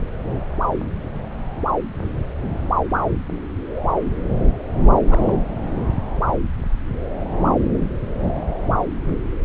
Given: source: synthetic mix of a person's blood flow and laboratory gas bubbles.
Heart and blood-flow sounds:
Doppler ultrasound of blood flow; subclavian vein
5.07-5.32 s: bubbles
From the record:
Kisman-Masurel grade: 222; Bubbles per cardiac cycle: several, 3 to 8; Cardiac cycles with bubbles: 10 to 50%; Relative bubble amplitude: moderate (0.250 to 0.450); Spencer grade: 2 (many but less than half of the cardiac periods contain bubble signals, singularly or in groups); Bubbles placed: anywhere in the cardiac cycle

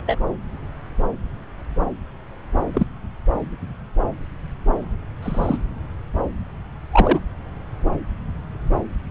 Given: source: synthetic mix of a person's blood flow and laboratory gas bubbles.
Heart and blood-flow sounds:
Doppler ultrasound of blood flow; subclavian vein
0.06-0.19 s: bubbles
2.73-2.87 s: bubbles
5.22-5.58 s: bubbles
6.92-7.20 s: bubbles
From the record:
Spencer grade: 2 (many but less than half of the cardiac periods contain bubble signals, singularly or in groups); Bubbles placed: anywhere in the cardiac cycle

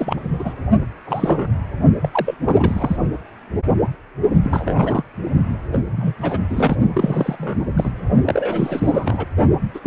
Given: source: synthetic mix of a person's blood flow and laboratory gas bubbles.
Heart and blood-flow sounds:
Doppler ultrasound of blood flow; precordium
0.00-0.21 s: bubbles
0.39-0.54 s: bubbles
1.05-1.58 s: bubbles
2.01-2.08 s: bubbles
2.12-2.35 s: bubbles
2.46-2.97 s: bubbles
4.43-5.03 s: bubbles
5.72-5.79 s: bubbles
5.92-6.14 s: bubbles
6.21-6.38 s: bubbles
6.50-6.76 s: bubbles
6.93-7.67 s: bubbles
7.76-7.91 s: bubbles
8.25-9.27 s: bubbles
9.74-9.79 s: bubbles
9.83-9.86 s: bubbles
From the record:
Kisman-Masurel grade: 332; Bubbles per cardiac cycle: rolling drumbeat, 9 or more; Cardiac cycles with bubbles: 50 to 99%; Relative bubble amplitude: moderate (0.250 to 0.450); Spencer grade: 3 (all of the cardiac periods contain showers or single bubble signals, but not dominating or overriding the cardiac motion signals); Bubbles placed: only in the low amplitude regions of the cardiac cycle

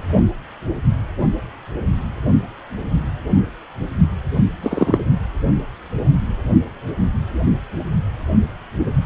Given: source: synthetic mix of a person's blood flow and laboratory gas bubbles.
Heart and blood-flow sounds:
Doppler ultrasound of blood flow; precordium
4.62-4.98 s: bubbles
From the record:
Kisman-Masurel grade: 113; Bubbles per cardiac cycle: 1 to 2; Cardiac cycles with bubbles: 1 to 10%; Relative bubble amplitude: loud (0.450 to 0.775); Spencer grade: 1 (occasional bubble signal discernible with the cardiac motion signal, with majority of cardiac periods free of bubbles); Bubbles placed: only in the low amplitude regions of the cardiac cycle

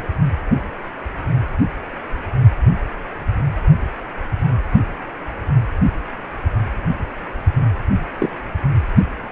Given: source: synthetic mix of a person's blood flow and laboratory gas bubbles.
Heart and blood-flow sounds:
Doppler ultrasound of blood flow; precordium
8.18-8.29 s: bubbles
From the record:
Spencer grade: 1 (occasional bubble signal discernible with the cardiac motion signal, with majority of cardiac periods free of bubbles); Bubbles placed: anywhere in the cardiac cycle

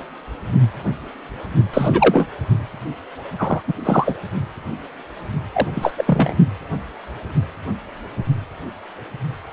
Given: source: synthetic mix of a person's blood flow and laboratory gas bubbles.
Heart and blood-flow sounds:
Doppler ultrasound of blood flow; precordium
1.73-2.27 s: bubbles
3.38-3.61 s: bubbles
3.68-3.73 s: bubbles
3.84-4.15 s: bubbles
5.53-5.68 s: bubbles
5.75-5.93 s: bubbles
5.98-6.33 s: bubbles
From the record:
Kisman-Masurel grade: 223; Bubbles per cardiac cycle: several, 3 to 8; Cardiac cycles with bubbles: 10 to 50%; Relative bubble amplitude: loud (0.450 to 0.775); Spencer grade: 2 (many but less than half of the cardiac periods contain bubble signals, singularly or in groups); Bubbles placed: only in the low amplitude regions of the cardiac cycle

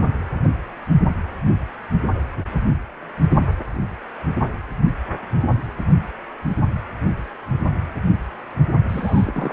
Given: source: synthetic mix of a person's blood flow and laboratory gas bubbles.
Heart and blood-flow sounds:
Doppler ultrasound of blood flow; precordium
8.88-9.53 s: bubbles
From the record:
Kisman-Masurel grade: 112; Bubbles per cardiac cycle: 1 to 2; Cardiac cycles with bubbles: 1 to 10%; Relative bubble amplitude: moderate (0.250 to 0.450); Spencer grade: 1 (occasional bubble signal discernible with the cardiac motion signal, with majority of cardiac periods free of bubbles); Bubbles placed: only in the low amplitude regions of the cardiac cycle

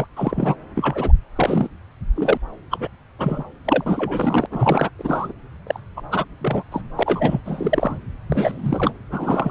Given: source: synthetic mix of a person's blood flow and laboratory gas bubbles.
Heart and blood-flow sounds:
Doppler ultrasound of blood flow; subclavian vein
0.00-0.06 s: bubbles
0.16-0.56 s: bubbles
0.74-1.12 s: bubbles
1.35-1.68 s: bubbles
2.15-2.38 s: bubbles
2.70-2.88 s: bubbles
3.18-3.44 s: bubbles
3.64-4.46 s: bubbles
4.50-4.90 s: bubbles
4.98-5.33 s: bubbles
5.67-5.80 s: bubbles
5.96-6.01 s: bubbles
6.10-6.25 s: bubbles
6.40-6.63 s: bubbles
6.71-6.81 s: bubbles
6.95-7.42 s: bubbles
7.45-8.00 s: bubbles
8.29-8.92 s: bubbles
9.11-9.51 s: bubbles
From the record:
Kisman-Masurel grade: 343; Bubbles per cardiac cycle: rolling drumbeat, 9 or more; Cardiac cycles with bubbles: 100%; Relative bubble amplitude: loud (0.450 to 0.775); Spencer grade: 3 (all of the cardiac periods contain showers or single bubble signals, but not dominating or overriding the cardiac motion signals); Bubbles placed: anywhere in the cardiac cycle

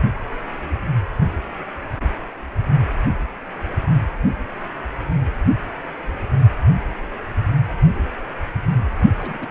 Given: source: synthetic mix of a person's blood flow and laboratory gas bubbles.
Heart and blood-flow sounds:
Doppler ultrasound of blood flow; precordium
9.17-9.51 s: bubbles
From the record:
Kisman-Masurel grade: 211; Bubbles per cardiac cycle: several, 3 to 8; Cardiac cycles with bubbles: 1 to 10%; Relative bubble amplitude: barely perceptible (0.100 to 0.250); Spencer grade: 1 (occasional bubble signal discernible with the cardiac motion signal, with majority of cardiac periods free of bubbles); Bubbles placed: only in the low amplitude regions of the cardiac cycle

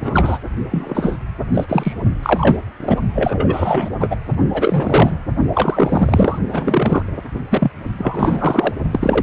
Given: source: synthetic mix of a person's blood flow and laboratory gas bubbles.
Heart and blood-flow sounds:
Doppler ultrasound of blood flow; precordium
0.01-0.39 s: bubbles
0.70-1.17 s: bubbles
1.54-1.65 s: bubbles
1.68-1.93 s: bubbles
2.22-2.58 s: bubbles
2.80-2.98 s: bubbles
3.15-3.89 s: bubbles
3.99-4.16 s: bubbles
4.53-5.19 s: bubbles
5.54-6.39 s: bubbles
6.48-7.02 s: bubbles
7.50-7.71 s: bubbles
7.98-8.74 s: bubbles
8.91-9.23 s: bubbles
From the record:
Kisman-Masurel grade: 343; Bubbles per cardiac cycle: rolling drumbeat, 9 or more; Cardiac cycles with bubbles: 100%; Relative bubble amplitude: loud (0.450 to 0.775); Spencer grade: 3 (all of the cardiac periods contain showers or single bubble signals, but not dominating or overriding the cardiac motion signals); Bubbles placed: only in the low amplitude regions of the cardiac cycle

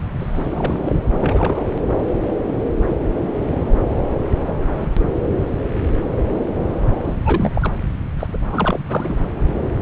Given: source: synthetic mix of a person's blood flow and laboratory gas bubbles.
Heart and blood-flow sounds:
Doppler ultrasound of blood flow; subclavian vein
0.19-1.02 s: bubbles
1.19-1.70 s: bubbles
1.89-1.94 s: bubbles
7.03-7.16 s: bubbles
7.25-7.73 s: bubbles
8.19-8.27 s: bubbles
8.33-8.38 s: bubbles
8.47-8.79 s: bubbles
8.88-9.29 s: bubbles
From the record:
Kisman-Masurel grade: 332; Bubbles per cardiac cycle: rolling drumbeat, 9 or more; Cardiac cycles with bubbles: 50 to 99%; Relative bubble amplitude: moderate (0.250 to 0.450); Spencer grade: 3 (all of the cardiac periods contain showers or single bubble signals, but not dominating or overriding the cardiac motion signals); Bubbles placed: anywhere in the cardiac cycle

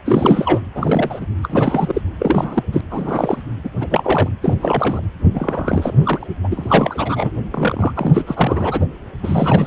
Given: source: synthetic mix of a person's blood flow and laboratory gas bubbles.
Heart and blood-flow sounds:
Doppler ultrasound of blood flow; precordium
0.05-0.62 s: bubbles
0.70-1.26 s: bubbles
1.43-2.02 s: bubbles
2.19-2.63 s: bubbles
2.73-2.82 s: bubbles
2.91-3.43 s: bubbles
3.64-3.70 s: bubbles
3.80-3.87 s: bubbles
3.90-4.29 s: bubbles
4.42-5.02 s: bubbles
5.33-6.27 s: bubbles
6.44-7.38 s: bubbles
7.52-7.93 s: bubbles
7.96-8.86 s: bubbles
9.23-9.67 s: bubbles
From the record:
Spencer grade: 3 (all of the cardiac periods contain showers or single bubble signals, but not dominating or overriding the cardiac motion signals); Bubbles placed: anywhere in the cardiac cycle

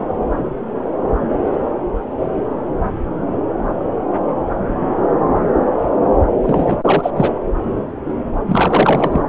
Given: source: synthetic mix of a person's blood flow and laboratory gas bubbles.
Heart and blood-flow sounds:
Doppler ultrasound of blood flow; subclavian vein
6.43-6.77 s: bubbles
6.85-7.10 s: bubbles
7.16-7.29 s: bubbles
8.46-9.21 s: bubbles
From the record:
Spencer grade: 2 (many but less than half of the cardiac periods contain bubble signals, singularly or in groups); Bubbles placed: anywhere in the cardiac cycle

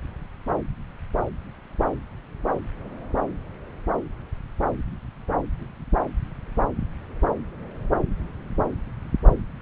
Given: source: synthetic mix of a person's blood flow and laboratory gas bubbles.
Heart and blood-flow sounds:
Doppler ultrasound of blood flow; subclavian vein
no bubbles
From the record:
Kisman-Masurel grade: 000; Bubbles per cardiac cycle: 0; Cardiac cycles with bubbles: 0%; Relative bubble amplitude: no bubbles discernible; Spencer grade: 0 (complete lack of bubble signals)

